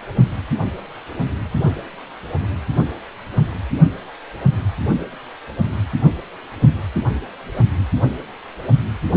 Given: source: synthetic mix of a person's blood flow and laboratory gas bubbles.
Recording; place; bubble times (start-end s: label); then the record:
Doppler ultrasound of blood flow; precordium
no bubbles
From the record:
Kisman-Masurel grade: 000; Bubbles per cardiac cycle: 0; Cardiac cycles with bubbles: 0%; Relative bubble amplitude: no bubbles discernible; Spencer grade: 0 (complete lack of bubble signals)